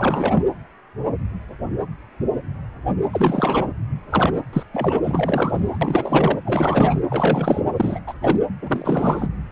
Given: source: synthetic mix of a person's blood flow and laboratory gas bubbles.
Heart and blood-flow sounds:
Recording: Doppler ultrasound of blood flow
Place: precordium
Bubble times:
0.00-0.44 s: bubbles
3.12-3.67 s: bubbles
4.10-4.43 s: bubbles
4.53-4.63 s: bubbles
4.74-4.99 s: bubbles
5.04-5.78 s: bubbles
5.81-6.39 s: bubbles
6.45-7.02 s: bubbles
7.09-7.62 s: bubbles
7.76-7.99 s: bubbles
8.06-8.13 s: bubbles
8.22-8.42 s: bubbles
8.62-9.29 s: bubbles
From the record:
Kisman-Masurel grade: 333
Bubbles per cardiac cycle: rolling drumbeat, 9 or more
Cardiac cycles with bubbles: 50 to 99%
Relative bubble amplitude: loud (0.450 to 0.775)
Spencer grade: 3 (all of the cardiac periods contain showers or single bubble signals, but not dominating or overriding the cardiac motion signals)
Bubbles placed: anywhere in the cardiac cycle

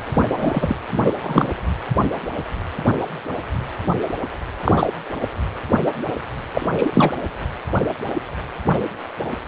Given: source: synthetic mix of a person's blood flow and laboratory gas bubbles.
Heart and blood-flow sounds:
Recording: Doppler ultrasound of blood flow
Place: precordium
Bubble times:
0.14-0.75 s: bubbles
0.92-1.15 s: bubbles
1.23-1.50 s: bubbles
4.62-4.87 s: bubbles
6.54-6.68 s: bubbles
6.76-7.12 s: bubbles
From the record:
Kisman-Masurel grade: 223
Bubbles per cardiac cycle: several, 3 to 8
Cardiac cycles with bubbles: 10 to 50%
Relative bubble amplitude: loud (0.450 to 0.775)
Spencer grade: 2 (many but less than half of the cardiac periods contain bubble signals, singularly or in groups)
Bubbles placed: anywhere in the cardiac cycle

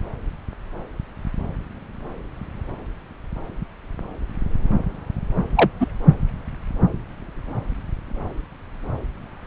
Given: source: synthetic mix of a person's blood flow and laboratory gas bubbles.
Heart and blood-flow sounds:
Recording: Doppler ultrasound of blood flow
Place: subclavian vein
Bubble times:
5.56-5.70 s: bubbles
5.80-5.86 s: bubbles
From the record:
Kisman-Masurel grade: 113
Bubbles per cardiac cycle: 1 to 2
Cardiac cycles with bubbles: 1 to 10%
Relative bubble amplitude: loud (0.450 to 0.775)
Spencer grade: 1 (occasional bubble signal discernible with the cardiac motion signal, with majority of cardiac periods free of bubbles)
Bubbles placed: anywhere in the cardiac cycle

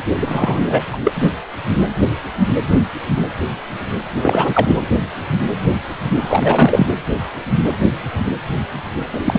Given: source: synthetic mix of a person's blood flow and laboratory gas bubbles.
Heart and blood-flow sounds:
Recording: Doppler ultrasound of blood flow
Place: precordium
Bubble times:
0.18-0.59 s: bubbles
0.65-0.85 s: bubbles
0.92-0.98 s: bubbles
1.04-1.11 s: bubbles
1.15-1.29 s: bubbles
4.22-4.82 s: bubbles
6.20-6.87 s: bubbles
9.13-9.20 s: bubbles
9.24-9.39 s: bubbles
From the record:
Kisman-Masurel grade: 223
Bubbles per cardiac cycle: several, 3 to 8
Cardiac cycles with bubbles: 10 to 50%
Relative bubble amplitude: loud (0.450 to 0.775)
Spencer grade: 2 (many but less than half of the cardiac periods contain bubble signals, singularly or in groups)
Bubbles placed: anywhere in the cardiac cycle

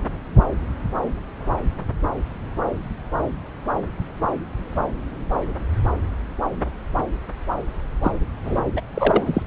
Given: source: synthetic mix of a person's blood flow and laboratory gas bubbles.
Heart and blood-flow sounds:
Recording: Doppler ultrasound of blood flow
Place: subclavian vein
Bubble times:
8.03-8.12 s: bubbles
8.45-8.61 s: bubbles
8.76-8.80 s: bubbles
8.94-9.43 s: bubbles
From the record:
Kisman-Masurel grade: 223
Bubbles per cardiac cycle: several, 3 to 8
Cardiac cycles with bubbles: 10 to 50%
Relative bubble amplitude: loud (0.450 to 0.775)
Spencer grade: 2 (many but less than half of the cardiac periods contain bubble signals, singularly or in groups)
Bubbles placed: anywhere in the cardiac cycle

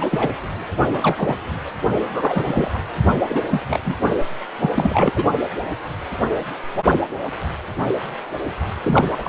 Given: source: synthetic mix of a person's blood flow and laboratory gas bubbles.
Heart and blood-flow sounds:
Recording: Doppler ultrasound of blood flow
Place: precordium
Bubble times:
0.00-0.29 s: bubbles
0.93-1.35 s: bubbles
2.08-2.70 s: bubbles
2.73-2.79 s: bubbles
3.29-3.40 s: bubbles
3.50-3.97 s: bubbles
4.60-4.70 s: bubbles
4.75-5.11 s: bubbles
5.15-5.24 s: bubbles
8.83-9.12 s: bubbles
9.19-9.28 s: bubbles
From the record:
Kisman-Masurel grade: 232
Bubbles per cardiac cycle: several, 3 to 8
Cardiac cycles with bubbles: 50 to 99%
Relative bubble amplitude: moderate (0.250 to 0.450)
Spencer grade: 3 (all of the cardiac periods contain showers or single bubble signals, but not dominating or overriding the cardiac motion signals)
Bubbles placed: only in the low amplitude regions of the cardiac cycle

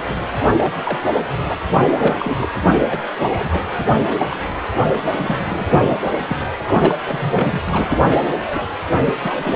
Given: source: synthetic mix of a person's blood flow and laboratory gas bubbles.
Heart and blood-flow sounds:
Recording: Doppler ultrasound of blood flow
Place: precordium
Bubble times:
0.00-0.13 s: bubbles
0.42-0.79 s: bubbles
0.84-0.98 s: bubbles
1.31-1.62 s: bubbles
1.69-1.85 s: bubbles
1.94-2.51 s: bubbles
2.90-3.00 s: bubbles
3.18-3.61 s: bubbles
3.78-3.95 s: bubbles
4.07-4.26 s: bubbles
4.30-4.41 s: bubbles
5.12-5.84 s: bubbles
5.88-5.97 s: bubbles
6.04-6.10 s: bubbles
6.29-6.36 s: bubbles
6.56-6.95 s: bubbles
7.08-7.59 s: bubbles
7.67-8.18 s: bubbles
8.46-8.60 s: bubbles
9.05-9.14 s: bubbles
9.25-9.55 s: bubbles
From the record:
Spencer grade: 3 (all of the cardiac periods contain showers or single bubble signals, but not dominating or overriding the cardiac motion signals)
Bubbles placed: anywhere in the cardiac cycle

